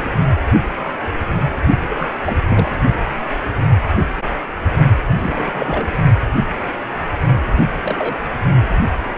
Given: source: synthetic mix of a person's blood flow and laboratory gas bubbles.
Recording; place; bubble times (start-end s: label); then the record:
Doppler ultrasound of blood flow; precordium
1.89-2.06 s: bubbles
2.23-2.68 s: bubbles
5.17-5.86 s: bubbles
7.83-8.16 s: bubbles
8.29-8.35 s: bubbles
From the record:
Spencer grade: 2 (many but less than half of the cardiac periods contain bubble signals, singularly or in groups); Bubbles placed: only in the low amplitude regions of the cardiac cycle